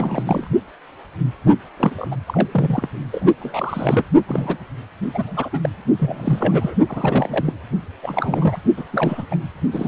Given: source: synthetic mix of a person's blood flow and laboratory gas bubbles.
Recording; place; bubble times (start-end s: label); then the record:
Doppler ultrasound of blood flow; precordium
0.00-0.48 s: bubbles
1.76-2.08 s: bubbles
2.11-2.17 s: bubbles
2.27-2.48 s: bubbles
2.52-2.88 s: bubbles
3.11-3.34 s: bubbles
3.39-4.06 s: bubbles
4.27-4.57 s: bubbles
5.13-5.60 s: bubbles
5.62-5.70 s: bubbles
5.99-6.75 s: bubbles
6.88-7.54 s: bubbles
8.02-8.60 s: bubbles
8.77-8.85 s: bubbles
8.91-9.26 s: bubbles
9.30-9.36 s: bubbles
9.44-9.49 s: bubbles
9.71-9.88 s: bubbles
From the record:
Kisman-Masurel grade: 332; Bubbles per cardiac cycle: rolling drumbeat, 9 or more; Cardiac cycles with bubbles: 50 to 99%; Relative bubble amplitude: moderate (0.250 to 0.450); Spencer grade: 3 (all of the cardiac periods contain showers or single bubble signals, but not dominating or overriding the cardiac motion signals); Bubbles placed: only in the low amplitude regions of the cardiac cycle